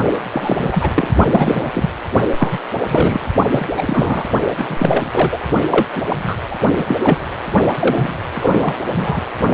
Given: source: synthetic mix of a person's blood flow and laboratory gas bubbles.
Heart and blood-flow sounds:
Doppler ultrasound of blood flow; precordium
0.31-0.69 s: bubbles
0.71-1.07 s: bubbles
1.31-1.71 s: bubbles
1.73-1.90 s: bubbles
2.38-2.58 s: bubbles
2.88-3.31 s: bubbles
3.50-3.66 s: bubbles
3.77-4.25 s: bubbles
4.58-5.42 s: bubbles
5.71-5.87 s: bubbles
5.96-6.01 s: bubbles
6.08-6.34 s: bubbles
6.50-6.55 s: bubbles
6.76-6.95 s: bubbles
7.04-7.19 s: bubbles
7.76-8.14 s: bubbles
8.34-8.75 s: bubbles
8.92-9.22 s: bubbles
From the record:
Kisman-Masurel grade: 343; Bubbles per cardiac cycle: rolling drumbeat, 9 or more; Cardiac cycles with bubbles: 100%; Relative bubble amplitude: loud (0.450 to 0.775); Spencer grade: 3 (all of the cardiac periods contain showers or single bubble signals, but not dominating or overriding the cardiac motion signals); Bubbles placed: only in the low amplitude regions of the cardiac cycle

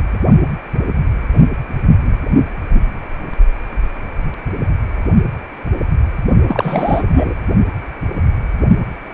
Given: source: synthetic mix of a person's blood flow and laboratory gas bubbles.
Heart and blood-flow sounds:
Doppler ultrasound of blood flow; precordium
6.48-7.35 s: bubbles
From the record:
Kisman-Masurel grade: 223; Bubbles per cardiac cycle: several, 3 to 8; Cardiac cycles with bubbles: 10 to 50%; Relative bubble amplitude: loud (0.450 to 0.775); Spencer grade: 2 (many but less than half of the cardiac periods contain bubble signals, singularly or in groups); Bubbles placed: only in the low amplitude regions of the cardiac cycle

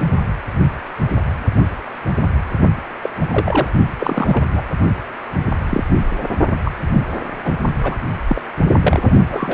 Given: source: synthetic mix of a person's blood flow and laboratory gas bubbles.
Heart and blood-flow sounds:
Doppler ultrasound of blood flow; precordium
3.02-3.10 s: bubbles
3.21-3.27 s: bubbles
3.31-3.69 s: bubbles
3.99-4.45 s: bubbles
4.53-4.63 s: bubbles
5.64-5.83 s: bubbles
5.93-6.00 s: bubbles
6.17-6.24 s: bubbles
6.65-6.71 s: bubbles
6.92-7.03 s: bubbles
7.44-7.54 s: bubbles
7.83-7.95 s: bubbles
8.27-8.41 s: bubbles
8.81-9.11 s: bubbles
9.29-9.54 s: bubbles
From the record:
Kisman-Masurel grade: 232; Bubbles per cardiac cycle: several, 3 to 8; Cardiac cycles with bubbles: 50 to 99%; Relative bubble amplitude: moderate (0.250 to 0.450); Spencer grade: 3 (all of the cardiac periods contain showers or single bubble signals, but not dominating or overriding the cardiac motion signals); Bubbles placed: only in the low amplitude regions of the cardiac cycle

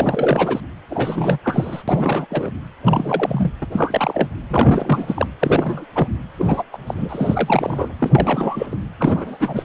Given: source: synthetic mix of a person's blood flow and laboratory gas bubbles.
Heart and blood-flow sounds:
Doppler ultrasound of blood flow; precordium
0.00-0.60 s: bubbles
0.90-1.38 s: bubbles
1.44-1.83 s: bubbles
1.88-2.26 s: bubbles
2.29-2.50 s: bubbles
2.84-3.52 s: bubbles
3.62-3.66 s: bubbles
3.72-4.29 s: bubbles
4.50-5.26 s: bubbles
5.40-5.84 s: bubbles
5.94-6.17 s: bubbles
6.38-6.63 s: bubbles
6.73-6.78 s: bubbles
6.87-7.89 s: bubbles
7.99-8.76 s: bubbles
9.00-9.38 s: bubbles
9.40-9.62 s: bubbles
From the record:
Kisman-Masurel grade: 342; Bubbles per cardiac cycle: rolling drumbeat, 9 or more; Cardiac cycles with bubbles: 100%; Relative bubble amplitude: moderate (0.250 to 0.450); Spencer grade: 3 (all of the cardiac periods contain showers or single bubble signals, but not dominating or overriding the cardiac motion signals); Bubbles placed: anywhere in the cardiac cycle

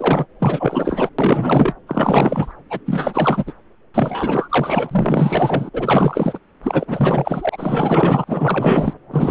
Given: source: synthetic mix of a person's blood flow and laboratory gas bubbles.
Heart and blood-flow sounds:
Doppler ultrasound of blood flow; subclavian vein
0.00-0.26 s: bubbles
0.39-1.09 s: bubbles
1.19-1.74 s: bubbles
1.87-2.52 s: bubbles
2.69-2.80 s: bubbles
2.85-3.44 s: bubbles
3.46-3.53 s: bubbles
3.94-5.70 s: bubbles
5.74-6.39 s: bubbles
6.62-8.24 s: bubbles
8.26-8.93 s: bubbles
9.11-9.31 s: bubbles
From the record:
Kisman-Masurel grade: 444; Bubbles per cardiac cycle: continuous sound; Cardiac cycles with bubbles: 100%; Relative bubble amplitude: maximal (0.775 to 0.999); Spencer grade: 4 (maximum detectable bubble signal sounding continuously throughout systole and diastole of every cardiac period, and overriding the amplitude of the normal cardiac signals); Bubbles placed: anywhere in the cardiac cycle

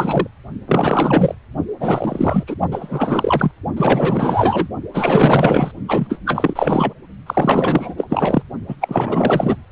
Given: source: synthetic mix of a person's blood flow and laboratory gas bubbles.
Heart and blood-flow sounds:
Doppler ultrasound of blood flow; precordium
0.00-0.27 s: bubbles
0.67-1.35 s: bubbles
1.79-2.44 s: bubbles
2.47-2.56 s: bubbles
2.71-3.52 s: bubbles
3.77-4.67 s: bubbles
4.93-5.71 s: bubbles
5.88-6.20 s: bubbles
6.25-6.93 s: bubbles
7.26-7.95 s: bubbles
7.97-8.07 s: bubbles
8.10-8.43 s: bubbles
8.68-8.76 s: bubbles
8.80-9.56 s: bubbles
From the record:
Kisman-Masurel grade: 444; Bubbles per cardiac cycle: continuous sound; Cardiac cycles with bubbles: 100%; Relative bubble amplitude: maximal (0.775 to 0.999); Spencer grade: 4 (maximum detectable bubble signal sounding continuously throughout systole and diastole of every cardiac period, and overriding the amplitude of the normal cardiac signals); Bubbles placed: only in the low amplitude regions of the cardiac cycle

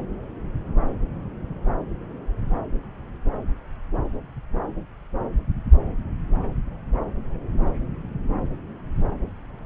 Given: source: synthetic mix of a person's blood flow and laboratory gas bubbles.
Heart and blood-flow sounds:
Doppler ultrasound of blood flow; subclavian vein
no bubbles
From the record:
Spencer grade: 0 (complete lack of bubble signals)

